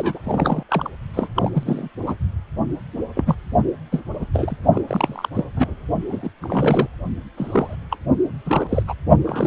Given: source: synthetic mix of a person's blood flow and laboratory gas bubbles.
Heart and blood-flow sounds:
Doppler ultrasound of blood flow; precordium
0.00-0.19 s: bubbles
0.24-0.63 s: bubbles
0.69-0.89 s: bubbles
1.14-1.28 s: bubbles
1.35-1.51 s: bubbles
1.53-1.89 s: bubbles
2.06-2.15 s: bubbles
3.15-3.35 s: bubbles
3.92-4.01 s: bubbles
4.19-4.25 s: bubbles
4.33-4.56 s: bubbles
4.73-4.82 s: bubbles
4.87-5.29 s: bubbles
5.34-5.44 s: bubbles
5.56-5.75 s: bubbles
6.11-6.31 s: bubbles
6.42-6.88 s: bubbles
7.37-7.75 s: bubbles
7.91-7.96 s: bubbles
8.45-8.82 s: bubbles
8.87-8.94 s: bubbles
9.22-9.47 s: bubbles
From the record:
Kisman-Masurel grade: 242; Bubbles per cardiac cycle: several, 3 to 8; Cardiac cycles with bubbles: 100%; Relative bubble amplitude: moderate (0.250 to 0.450); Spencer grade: 3 (all of the cardiac periods contain showers or single bubble signals, but not dominating or overriding the cardiac motion signals); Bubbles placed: only in the low amplitude regions of the cardiac cycle

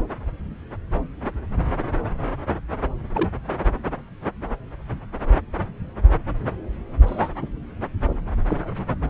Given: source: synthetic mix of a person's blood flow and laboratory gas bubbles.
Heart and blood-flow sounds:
Doppler ultrasound of blood flow; subclavian vein
3.14-3.29 s: bubbles
7.06-7.29 s: bubbles
7.41-7.46 s: bubbles
8.47-8.69 s: bubbles
From the record:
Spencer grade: 2 (many but less than half of the cardiac periods contain bubble signals, singularly or in groups); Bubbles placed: anywhere in the cardiac cycle

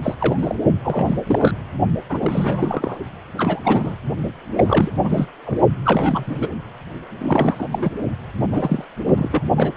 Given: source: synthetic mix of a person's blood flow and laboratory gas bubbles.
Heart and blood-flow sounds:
Doppler ultrasound of blood flow; precordium
0.03-0.14 s: bubbles
0.19-0.56 s: bubbles
0.82-1.17 s: bubbles
1.27-1.52 s: bubbles
2.10-2.98 s: bubbles
3.37-3.95 s: bubbles
4.55-4.91 s: bubbles
5.02-5.25 s: bubbles
5.44-5.60 s: bubbles
5.83-6.48 s: bubbles
7.21-7.67 s: bubbles
7.72-7.92 s: bubbles
8.40-8.85 s: bubbles
9.05-9.43 s: bubbles
9.57-9.73 s: bubbles
From the record:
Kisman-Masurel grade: 342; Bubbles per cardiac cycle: rolling drumbeat, 9 or more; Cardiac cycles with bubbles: 100%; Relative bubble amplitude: moderate (0.250 to 0.450); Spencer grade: 3 (all of the cardiac periods contain showers or single bubble signals, but not dominating or overriding the cardiac motion signals); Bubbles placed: only in the low amplitude regions of the cardiac cycle

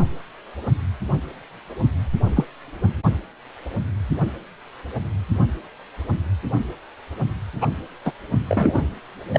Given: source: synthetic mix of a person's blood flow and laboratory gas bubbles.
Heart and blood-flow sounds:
Doppler ultrasound of blood flow; precordium
2.36-2.44 s: bubbles
7.61-7.67 s: bubbles
8.05-8.12 s: bubbles
8.49-8.84 s: bubbles
9.33-9.39 s: bubbles
From the record:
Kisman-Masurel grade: 123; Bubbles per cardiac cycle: 1 to 2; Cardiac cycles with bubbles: 10 to 50%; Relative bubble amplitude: loud (0.450 to 0.775); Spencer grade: 2 (many but less than half of the cardiac periods contain bubble signals, singularly or in groups); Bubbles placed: only in the low amplitude regions of the cardiac cycle

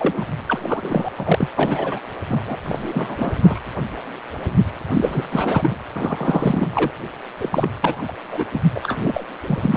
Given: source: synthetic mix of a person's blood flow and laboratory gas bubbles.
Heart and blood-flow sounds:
Doppler ultrasound of blood flow; precordium
0.00-0.27 s: bubbles
0.46-1.08 s: bubbles
1.18-1.48 s: bubbles
1.56-1.99 s: bubbles
2.28-2.43 s: bubbles
2.46-2.56 s: bubbles
2.63-3.33 s: bubbles
3.42-3.60 s: bubbles
4.94-5.25 s: bubbles
5.32-5.79 s: bubbles
5.93-6.91 s: bubbles
7.38-7.70 s: bubbles
7.82-8.12 s: bubbles
8.30-8.44 s: bubbles
8.54-8.63 s: bubbles
8.75-8.80 s: bubbles
8.83-9.24 s: bubbles
9.47-9.77 s: bubbles
From the record:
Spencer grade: 3 (all of the cardiac periods contain showers or single bubble signals, but not dominating or overriding the cardiac motion signals); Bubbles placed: anywhere in the cardiac cycle

